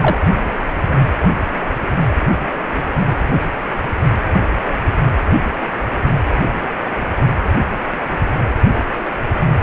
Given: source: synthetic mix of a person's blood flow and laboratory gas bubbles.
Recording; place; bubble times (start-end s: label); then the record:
Doppler ultrasound of blood flow; precordium
0.01-0.17 s: bubbles
From the record:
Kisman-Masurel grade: 213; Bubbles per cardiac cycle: several, 3 to 8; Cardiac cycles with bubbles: 1 to 10%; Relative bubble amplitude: loud (0.450 to 0.775); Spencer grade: 1 (occasional bubble signal discernible with the cardiac motion signal, with majority of cardiac periods free of bubbles); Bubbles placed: anywhere in the cardiac cycle